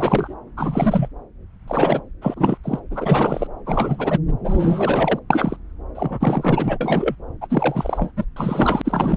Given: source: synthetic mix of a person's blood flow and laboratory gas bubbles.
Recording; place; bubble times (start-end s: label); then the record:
Doppler ultrasound of blood flow; subclavian vein
0.00-0.34 s: bubbles
0.57-1.08 s: bubbles
1.68-2.01 s: bubbles
2.21-2.58 s: bubbles
2.64-2.79 s: bubbles
2.91-3.47 s: bubbles
3.66-4.19 s: bubbles
4.44-5.19 s: bubbles
5.30-5.56 s: bubbles
5.95-6.77 s: bubbles
6.80-7.15 s: bubbles
7.41-7.47 s: bubbles
7.49-8.11 s: bubbles
8.16-8.24 s: bubbles
8.36-8.81 s: bubbles
8.84-9.16 s: bubbles
From the record:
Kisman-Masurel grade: 333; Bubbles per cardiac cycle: rolling drumbeat, 9 or more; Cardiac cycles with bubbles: 50 to 99%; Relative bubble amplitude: loud (0.450 to 0.775); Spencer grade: 3 (all of the cardiac periods contain showers or single bubble signals, but not dominating or overriding the cardiac motion signals); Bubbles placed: anywhere in the cardiac cycle